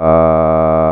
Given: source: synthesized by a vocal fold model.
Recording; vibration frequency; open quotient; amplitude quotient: sustained vowel; 80 Hz; 0.3; 1.1